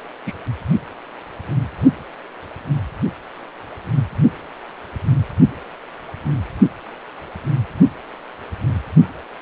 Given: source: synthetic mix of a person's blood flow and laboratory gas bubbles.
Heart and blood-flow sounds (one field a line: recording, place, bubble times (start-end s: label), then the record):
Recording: Doppler ultrasound of blood flow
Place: precordium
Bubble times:
0.26-0.33 s: bubbles
From the record:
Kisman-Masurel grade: 212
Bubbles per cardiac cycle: several, 3 to 8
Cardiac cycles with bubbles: 1 to 10%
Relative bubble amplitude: moderate (0.250 to 0.450)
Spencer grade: 1 (occasional bubble signal discernible with the cardiac motion signal, with majority of cardiac periods free of bubbles)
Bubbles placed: only in the low amplitude regions of the cardiac cycle